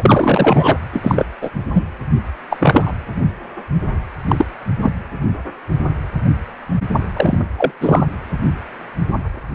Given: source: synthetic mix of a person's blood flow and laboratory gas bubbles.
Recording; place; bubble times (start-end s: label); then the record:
Doppler ultrasound of blood flow; precordium
0.00-0.78 s: bubbles
0.93-1.26 s: bubbles
1.42-1.51 s: bubbles
1.74-1.85 s: bubbles
2.50-2.92 s: bubbles
4.28-4.45 s: bubbles
4.82-4.91 s: bubbles
7.16-7.38 s: bubbles
7.58-7.71 s: bubbles
7.81-8.04 s: bubbles
From the record:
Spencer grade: 2 (many but less than half of the cardiac periods contain bubble signals, singularly or in groups); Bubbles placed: anywhere in the cardiac cycle